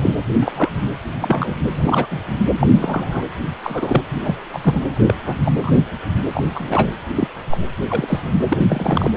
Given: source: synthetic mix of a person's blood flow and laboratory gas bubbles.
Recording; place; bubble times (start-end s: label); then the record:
Doppler ultrasound of blood flow; precordium
0.00-0.15 s: bubbles
0.41-0.52 s: bubbles
0.55-0.69 s: bubbles
1.19-1.55 s: bubbles
1.77-2.07 s: bubbles
2.11-2.21 s: bubbles
2.59-2.67 s: bubbles
2.73-3.23 s: bubbles
3.64-4.02 s: bubbles
4.11-4.19 s: bubbles
4.24-4.35 s: bubbles
4.52-4.80 s: bubbles
5.07-5.13 s: bubbles
5.25-5.36 s: bubbles
5.43-5.71 s: bubbles
6.34-6.42 s: bubbles
6.54-6.92 s: bubbles
7.13-7.28 s: bubbles
7.49-7.58 s: bubbles
7.90-8.20 s: bubbles
8.49-8.58 s: bubbles
8.68-9.10 s: bubbles
From the record:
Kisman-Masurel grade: 242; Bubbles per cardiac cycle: several, 3 to 8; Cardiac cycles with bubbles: 100%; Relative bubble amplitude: moderate (0.250 to 0.450); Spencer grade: 3 (all of the cardiac periods contain showers or single bubble signals, but not dominating or overriding the cardiac motion signals); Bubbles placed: anywhere in the cardiac cycle